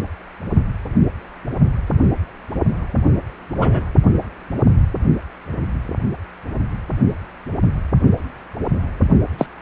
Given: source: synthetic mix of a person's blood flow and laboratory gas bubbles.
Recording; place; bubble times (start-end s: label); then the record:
Doppler ultrasound of blood flow; precordium
3.58-3.83 s: bubbles
9.38-9.46 s: bubbles
From the record:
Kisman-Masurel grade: 123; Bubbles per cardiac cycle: 1 to 2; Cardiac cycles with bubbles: 10 to 50%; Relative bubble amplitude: loud (0.450 to 0.775); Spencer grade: 2 (many but less than half of the cardiac periods contain bubble signals, singularly or in groups); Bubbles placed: only in the low amplitude regions of the cardiac cycle